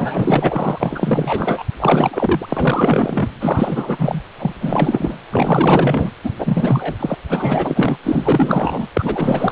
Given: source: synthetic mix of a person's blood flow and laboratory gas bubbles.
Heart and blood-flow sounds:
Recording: Doppler ultrasound of blood flow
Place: precordium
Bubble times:
0.00-1.62 s: bubbles
1.80-2.46 s: bubbles
2.48-3.29 s: bubbles
3.40-4.22 s: bubbles
4.38-4.54 s: bubbles
4.60-5.18 s: bubbles
5.32-6.10 s: bubbles
6.24-6.32 s: bubbles
6.38-6.96 s: bubbles
6.99-7.15 s: bubbles
7.29-7.97 s: bubbles
8.04-8.87 s: bubbles
8.93-9.52 s: bubbles
From the record:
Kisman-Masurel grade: 444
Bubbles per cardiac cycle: continuous sound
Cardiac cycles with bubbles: 100%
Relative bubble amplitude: maximal (0.775 to 0.999)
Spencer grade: 4 (maximum detectable bubble signal sounding continuously throughout systole and diastole of every cardiac period, and overriding the amplitude of the normal cardiac signals)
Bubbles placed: anywhere in the cardiac cycle

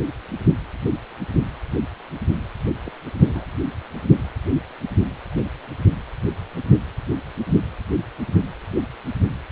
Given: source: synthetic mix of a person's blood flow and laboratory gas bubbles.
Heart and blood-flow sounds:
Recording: Doppler ultrasound of blood flow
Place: precordium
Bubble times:
2.85-2.91 s: bubbles
3.27-3.45 s: bubbles
From the record:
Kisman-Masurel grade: 111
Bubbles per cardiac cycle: 1 to 2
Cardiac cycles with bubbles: 1 to 10%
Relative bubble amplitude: barely perceptible (0.100 to 0.250)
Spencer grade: 1 (occasional bubble signal discernible with the cardiac motion signal, with majority of cardiac periods free of bubbles)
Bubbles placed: anywhere in the cardiac cycle

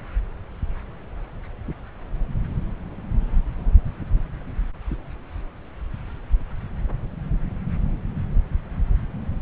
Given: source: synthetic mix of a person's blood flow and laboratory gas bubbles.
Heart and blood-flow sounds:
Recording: Doppler ultrasound of blood flow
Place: subclavian vein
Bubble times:
no bubbles
From the record:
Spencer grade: 0 (complete lack of bubble signals)

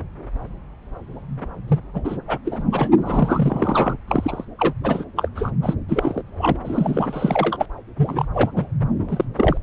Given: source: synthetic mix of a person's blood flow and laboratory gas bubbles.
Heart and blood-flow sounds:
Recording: Doppler ultrasound of blood flow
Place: subclavian vein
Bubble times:
1.68-1.80 s: bubbles
1.93-2.01 s: bubbles
2.04-2.18 s: bubbles
2.28-2.38 s: bubbles
2.45-2.62 s: bubbles
2.72-2.89 s: bubbles
2.97-3.97 s: bubbles
4.08-4.45 s: bubbles
4.58-4.73 s: bubbles
4.83-5.04 s: bubbles
5.16-5.28 s: bubbles
5.35-5.50 s: bubbles
5.62-5.75 s: bubbles
5.88-6.22 s: bubbles
6.38-6.56 s: bubbles
6.64-7.66 s: bubbles
7.97-8.25 s: bubbles
8.33-8.49 s: bubbles
8.56-8.65 s: bubbles
9.08-9.25 s: bubbles
9.35-9.57 s: bubbles
From the record:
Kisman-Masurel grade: 332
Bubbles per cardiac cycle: rolling drumbeat, 9 or more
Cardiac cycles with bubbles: 50 to 99%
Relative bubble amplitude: moderate (0.250 to 0.450)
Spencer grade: 3 (all of the cardiac periods contain showers or single bubble signals, but not dominating or overriding the cardiac motion signals)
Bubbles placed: anywhere in the cardiac cycle

